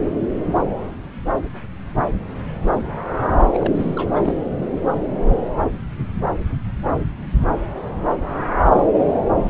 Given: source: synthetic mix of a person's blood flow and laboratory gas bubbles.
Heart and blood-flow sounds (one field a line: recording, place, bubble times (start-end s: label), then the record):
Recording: Doppler ultrasound of blood flow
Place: subclavian vein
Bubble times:
3.53-4.35 s: bubbles
From the record:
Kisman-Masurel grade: 211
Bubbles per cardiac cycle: several, 3 to 8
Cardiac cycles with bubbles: 1 to 10%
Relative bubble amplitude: barely perceptible (0.100 to 0.250)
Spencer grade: 1 (occasional bubble signal discernible with the cardiac motion signal, with majority of cardiac periods free of bubbles)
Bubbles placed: anywhere in the cardiac cycle